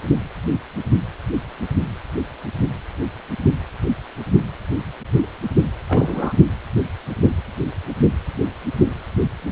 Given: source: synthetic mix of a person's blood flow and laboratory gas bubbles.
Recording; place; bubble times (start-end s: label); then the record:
Doppler ultrasound of blood flow; precordium
5.88-6.33 s: bubbles
From the record:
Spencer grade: 1 (occasional bubble signal discernible with the cardiac motion signal, with majority of cardiac periods free of bubbles); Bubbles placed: only in the low amplitude regions of the cardiac cycle